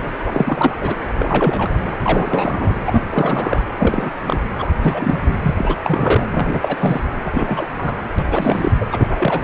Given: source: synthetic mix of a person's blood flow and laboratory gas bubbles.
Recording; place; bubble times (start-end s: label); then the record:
Doppler ultrasound of blood flow; precordium
0.26-0.75 s: bubbles
0.80-0.96 s: bubbles
1.14-1.70 s: bubbles
1.85-1.94 s: bubbles
2.04-2.73 s: bubbles
2.86-3.02 s: bubbles
3.10-3.63 s: bubbles
3.79-4.11 s: bubbles
4.26-4.43 s: bubbles
4.58-4.68 s: bubbles
4.80-5.35 s: bubbles
5.42-5.76 s: bubbles
5.83-6.29 s: bubbles
6.33-7.01 s: bubbles
7.25-7.67 s: bubbles
7.78-7.97 s: bubbles
8.18-8.24 s: bubbles
8.31-8.71 s: bubbles
8.80-8.85 s: bubbles
8.91-9.44 s: bubbles
From the record:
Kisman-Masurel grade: 343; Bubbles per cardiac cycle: rolling drumbeat, 9 or more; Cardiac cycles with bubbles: 100%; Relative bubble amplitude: loud (0.450 to 0.775); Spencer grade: 3 (all of the cardiac periods contain showers or single bubble signals, but not dominating or overriding the cardiac motion signals); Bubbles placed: anywhere in the cardiac cycle